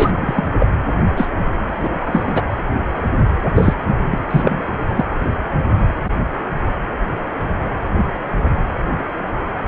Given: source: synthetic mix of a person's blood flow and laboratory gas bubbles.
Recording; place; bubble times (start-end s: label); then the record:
Doppler ultrasound of blood flow; precordium
0.00-0.12 s: bubbles
0.21-0.49 s: bubbles
0.59-0.67 s: bubbles
1.17-1.29 s: bubbles
1.67-1.89 s: bubbles
2.00-2.44 s: bubbles
3.56-3.74 s: bubbles
3.86-3.93 s: bubbles
4.10-4.18 s: bubbles
4.30-4.61 s: bubbles
4.89-5.05 s: bubbles
From the record:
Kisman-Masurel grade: 223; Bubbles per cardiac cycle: several, 3 to 8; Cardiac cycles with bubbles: 10 to 50%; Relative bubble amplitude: loud (0.450 to 0.775); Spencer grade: 2 (many but less than half of the cardiac periods contain bubble signals, singularly or in groups); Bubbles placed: anywhere in the cardiac cycle